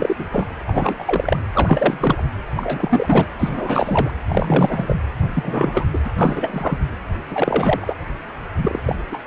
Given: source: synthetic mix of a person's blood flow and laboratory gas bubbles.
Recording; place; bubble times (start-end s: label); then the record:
Doppler ultrasound of blood flow; precordium
0.00-0.25 s: bubbles
0.32-0.46 s: bubbles
0.67-0.95 s: bubbles
0.98-1.37 s: bubbles
1.52-2.25 s: bubbles
2.56-3.27 s: bubbles
3.40-4.11 s: bubbles
4.28-4.96 s: bubbles
5.33-5.86 s: bubbles
5.93-6.00 s: bubbles
6.05-6.10 s: bubbles
6.17-6.79 s: bubbles
7.31-7.95 s: bubbles
8.62-8.80 s: bubbles
8.85-8.96 s: bubbles
9.12-9.18 s: bubbles
From the record:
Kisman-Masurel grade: 343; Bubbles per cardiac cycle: rolling drumbeat, 9 or more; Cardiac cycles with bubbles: 100%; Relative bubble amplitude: loud (0.450 to 0.775); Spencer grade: 3 (all of the cardiac periods contain showers or single bubble signals, but not dominating or overriding the cardiac motion signals); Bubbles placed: anywhere in the cardiac cycle